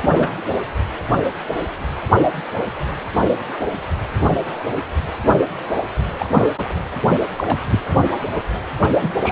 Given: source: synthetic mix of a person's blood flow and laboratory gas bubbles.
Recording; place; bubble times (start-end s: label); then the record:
Doppler ultrasound of blood flow; precordium
0.03-0.34 s: bubbles
6.19-6.29 s: bubbles
6.34-6.51 s: bubbles
7.07-7.17 s: bubbles
7.37-7.59 s: bubbles
7.68-7.79 s: bubbles
9.01-9.09 s: bubbles
9.20-9.32 s: bubbles
From the record:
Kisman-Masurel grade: 232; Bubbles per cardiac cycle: several, 3 to 8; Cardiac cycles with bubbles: 50 to 99%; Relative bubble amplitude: moderate (0.250 to 0.450); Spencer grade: 3 (all of the cardiac periods contain showers or single bubble signals, but not dominating or overriding the cardiac motion signals); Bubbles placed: anywhere in the cardiac cycle